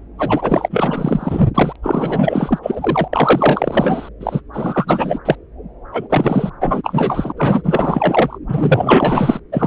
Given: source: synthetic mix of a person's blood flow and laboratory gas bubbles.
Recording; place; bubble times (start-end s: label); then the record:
Doppler ultrasound of blood flow; subclavian vein
0.18-1.50 s: bubbles
1.54-1.73 s: bubbles
1.82-2.59 s: bubbles
2.62-3.08 s: bubbles
3.12-4.09 s: bubbles
4.20-4.41 s: bubbles
4.53-5.19 s: bubbles
5.25-5.35 s: bubbles
5.92-6.50 s: bubbles
6.60-7.33 s: bubbles
7.37-8.38 s: bubbles
8.48-9.40 s: bubbles
9.52-9.66 s: bubbles
From the record:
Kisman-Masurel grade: 444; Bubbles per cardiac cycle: continuous sound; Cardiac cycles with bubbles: 100%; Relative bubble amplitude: maximal (0.775 to 0.999); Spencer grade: 4 (maximum detectable bubble signal sounding continuously throughout systole and diastole of every cardiac period, and overriding the amplitude of the normal cardiac signals); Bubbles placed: anywhere in the cardiac cycle